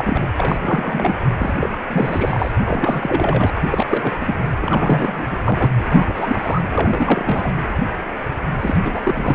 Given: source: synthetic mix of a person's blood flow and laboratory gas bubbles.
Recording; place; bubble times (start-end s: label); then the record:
Doppler ultrasound of blood flow; precordium
0.00-0.27 s: bubbles
0.36-1.17 s: bubbles
1.39-1.54 s: bubbles
1.60-1.78 s: bubbles
1.89-2.51 s: bubbles
2.64-3.50 s: bubbles
3.55-3.61 s: bubbles
3.70-3.85 s: bubbles
3.88-4.16 s: bubbles
4.21-4.36 s: bubbles
4.61-5.38 s: bubbles
5.44-5.67 s: bubbles
5.77-6.69 s: bubbles
6.75-7.52 s: bubbles
8.61-8.80 s: bubbles
8.84-9.01 s: bubbles
9.03-9.35 s: bubbles
From the record:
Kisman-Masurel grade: 333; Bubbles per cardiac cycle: rolling drumbeat, 9 or more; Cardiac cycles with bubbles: 50 to 99%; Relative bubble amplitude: loud (0.450 to 0.775); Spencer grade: 3 (all of the cardiac periods contain showers or single bubble signals, but not dominating or overriding the cardiac motion signals); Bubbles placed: anywhere in the cardiac cycle